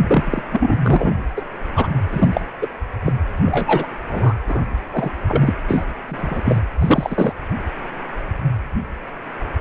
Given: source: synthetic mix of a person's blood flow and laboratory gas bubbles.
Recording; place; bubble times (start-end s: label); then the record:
Doppler ultrasound of blood flow; precordium
0.08-0.42 s: bubbles
0.52-0.77 s: bubbles
0.82-1.23 s: bubbles
1.36-1.42 s: bubbles
1.75-1.88 s: bubbles
2.10-2.41 s: bubbles
2.61-2.67 s: bubbles
3.06-3.12 s: bubbles
3.44-3.86 s: bubbles
4.08-4.34 s: bubbles
4.47-4.66 s: bubbles
4.92-5.11 s: bubbles
5.28-5.54 s: bubbles
5.68-5.85 s: bubbles
6.08-6.60 s: bubbles
6.81-7.32 s: bubbles
From the record:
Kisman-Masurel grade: 232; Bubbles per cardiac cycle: several, 3 to 8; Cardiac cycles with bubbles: 50 to 99%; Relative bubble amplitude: moderate (0.250 to 0.450); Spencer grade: 3 (all of the cardiac periods contain showers or single bubble signals, but not dominating or overriding the cardiac motion signals); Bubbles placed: anywhere in the cardiac cycle